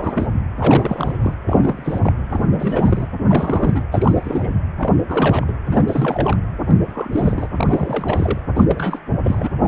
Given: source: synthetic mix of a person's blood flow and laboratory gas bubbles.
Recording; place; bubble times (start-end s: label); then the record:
Doppler ultrasound of blood flow; precordium
0.00-0.28 s: bubbles
0.58-1.34 s: bubbles
1.46-2.13 s: bubbles
2.29-3.08 s: bubbles
3.29-3.82 s: bubbles
3.92-4.53 s: bubbles
4.79-4.92 s: bubbles
5.08-5.53 s: bubbles
5.67-6.37 s: bubbles
6.67-6.75 s: bubbles
6.81-7.47 s: bubbles
7.56-8.42 s: bubbles
8.56-8.64 s: bubbles
8.67-8.99 s: bubbles
9.24-9.51 s: bubbles
9.63-9.68 s: bubbles
From the record:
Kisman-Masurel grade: 342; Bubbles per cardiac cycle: rolling drumbeat, 9 or more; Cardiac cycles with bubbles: 100%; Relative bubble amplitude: moderate (0.250 to 0.450); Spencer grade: 3 (all of the cardiac periods contain showers or single bubble signals, but not dominating or overriding the cardiac motion signals); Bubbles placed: anywhere in the cardiac cycle